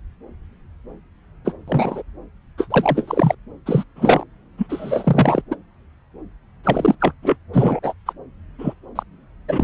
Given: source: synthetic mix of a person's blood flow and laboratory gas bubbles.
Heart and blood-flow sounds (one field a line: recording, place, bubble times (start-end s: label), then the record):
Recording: Doppler ultrasound of blood flow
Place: subclavian vein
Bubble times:
1.44-1.53 s: bubbles
1.67-2.02 s: bubbles
2.58-2.67 s: bubbles
2.70-3.35 s: bubbles
3.66-3.84 s: bubbles
3.96-4.24 s: bubbles
4.58-5.42 s: bubbles
5.50-5.55 s: bubbles
6.63-6.95 s: bubbles
7.00-7.12 s: bubbles
7.22-7.37 s: bubbles
7.53-7.79 s: bubbles
7.82-7.93 s: bubbles
8.06-8.12 s: bubbles
8.58-8.73 s: bubbles
8.95-9.03 s: bubbles
9.48-9.64 s: bubbles
From the record:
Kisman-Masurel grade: 233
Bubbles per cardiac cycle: several, 3 to 8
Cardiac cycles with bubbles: 50 to 99%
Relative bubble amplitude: loud (0.450 to 0.775)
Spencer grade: 3 (all of the cardiac periods contain showers or single bubble signals, but not dominating or overriding the cardiac motion signals)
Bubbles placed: anywhere in the cardiac cycle